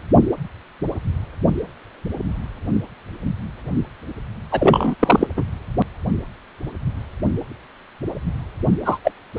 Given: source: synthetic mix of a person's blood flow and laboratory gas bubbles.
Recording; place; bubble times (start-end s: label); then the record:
Doppler ultrasound of blood flow; precordium
4.51-4.96 s: bubbles
4.99-5.27 s: bubbles
5.36-5.44 s: bubbles
8.84-8.98 s: bubbles
9.04-9.12 s: bubbles
9.37-9.39 s: bubbles
From the record:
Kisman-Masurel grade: 223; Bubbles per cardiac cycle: several, 3 to 8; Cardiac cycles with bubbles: 10 to 50%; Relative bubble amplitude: loud (0.450 to 0.775); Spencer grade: 2 (many but less than half of the cardiac periods contain bubble signals, singularly or in groups); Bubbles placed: anywhere in the cardiac cycle